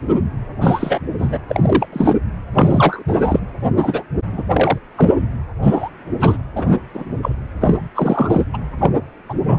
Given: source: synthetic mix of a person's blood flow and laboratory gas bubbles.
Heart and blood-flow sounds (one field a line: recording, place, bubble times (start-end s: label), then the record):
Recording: Doppler ultrasound of blood flow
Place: precordium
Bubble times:
0.61-1.00 s: bubbles
1.18-1.39 s: bubbles
1.48-1.85 s: bubbles
1.92-2.16 s: bubbles
2.53-3.03 s: bubbles
3.07-3.40 s: bubbles
3.76-4.03 s: bubbles
4.32-4.43 s: bubbles
4.52-4.78 s: bubbles
4.97-5.12 s: bubbles
5.61-5.89 s: bubbles
6.19-6.38 s: bubbles
6.55-6.78 s: bubbles
6.93-7.05 s: bubbles
7.22-7.35 s: bubbles
7.60-7.74 s: bubbles
7.95-8.44 s: bubbles
8.54-8.58 s: bubbles
8.79-8.91 s: bubbles
9.29-9.34 s: bubbles
9.46-9.59 s: bubbles
From the record:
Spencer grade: 3 (all of the cardiac periods contain showers or single bubble signals, but not dominating or overriding the cardiac motion signals)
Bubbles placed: anywhere in the cardiac cycle